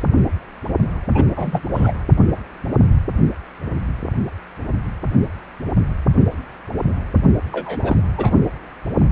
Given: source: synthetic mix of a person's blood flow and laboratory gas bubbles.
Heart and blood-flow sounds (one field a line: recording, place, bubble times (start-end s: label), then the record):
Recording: Doppler ultrasound of blood flow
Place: precordium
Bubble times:
1.14-1.24 s: bubbles
1.36-1.61 s: bubbles
1.75-1.93 s: bubbles
7.52-7.96 s: bubbles
8.17-8.31 s: bubbles
From the record:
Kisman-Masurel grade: 222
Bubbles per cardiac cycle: several, 3 to 8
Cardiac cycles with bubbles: 10 to 50%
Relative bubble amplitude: moderate (0.250 to 0.450)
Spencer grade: 2 (many but less than half of the cardiac periods contain bubble signals, singularly or in groups)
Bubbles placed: only in the low amplitude regions of the cardiac cycle